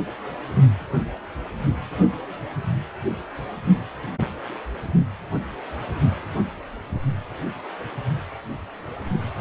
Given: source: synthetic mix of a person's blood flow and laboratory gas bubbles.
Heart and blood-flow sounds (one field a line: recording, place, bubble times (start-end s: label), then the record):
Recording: Doppler ultrasound of blood flow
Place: precordium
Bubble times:
no bubbles
From the record:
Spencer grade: 0 (complete lack of bubble signals)